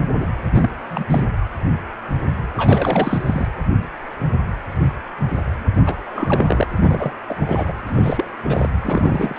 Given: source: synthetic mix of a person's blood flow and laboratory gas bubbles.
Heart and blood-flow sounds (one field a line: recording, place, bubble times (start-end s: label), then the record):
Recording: Doppler ultrasound of blood flow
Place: precordium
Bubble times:
0.00-0.05 s: bubbles
0.18-0.29 s: bubbles
0.52-0.70 s: bubbles
0.91-1.05 s: bubbles
1.09-1.24 s: bubbles
2.56-3.47 s: bubbles
5.75-5.82 s: bubbles
5.86-5.95 s: bubbles
6.04-6.67 s: bubbles
6.76-7.12 s: bubbles
7.27-7.73 s: bubbles
7.87-8.25 s: bubbles
8.44-8.70 s: bubbles
8.81-9.39 s: bubbles
From the record:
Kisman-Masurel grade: 332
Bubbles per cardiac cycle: rolling drumbeat, 9 or more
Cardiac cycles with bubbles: 50 to 99%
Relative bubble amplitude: moderate (0.250 to 0.450)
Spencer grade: 3 (all of the cardiac periods contain showers or single bubble signals, but not dominating or overriding the cardiac motion signals)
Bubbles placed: anywhere in the cardiac cycle